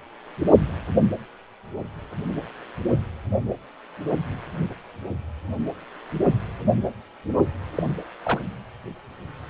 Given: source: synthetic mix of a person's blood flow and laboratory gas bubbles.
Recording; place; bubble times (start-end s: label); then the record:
Doppler ultrasound of blood flow; precordium
7.75-7.83 s: bubbles
8.23-8.40 s: bubbles
From the record:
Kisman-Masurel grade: 112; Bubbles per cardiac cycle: 1 to 2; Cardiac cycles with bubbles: 1 to 10%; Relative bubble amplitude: moderate (0.250 to 0.450); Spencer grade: 1 (occasional bubble signal discernible with the cardiac motion signal, with majority of cardiac periods free of bubbles); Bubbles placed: only in the low amplitude regions of the cardiac cycle